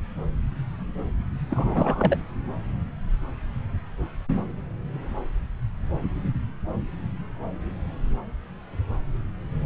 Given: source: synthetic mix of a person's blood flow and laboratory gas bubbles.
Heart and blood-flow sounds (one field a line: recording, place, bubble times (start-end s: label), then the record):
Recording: Doppler ultrasound of blood flow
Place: subclavian vein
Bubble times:
1.50-2.17 s: bubbles
From the record:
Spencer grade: 1 (occasional bubble signal discernible with the cardiac motion signal, with majority of cardiac periods free of bubbles)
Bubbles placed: anywhere in the cardiac cycle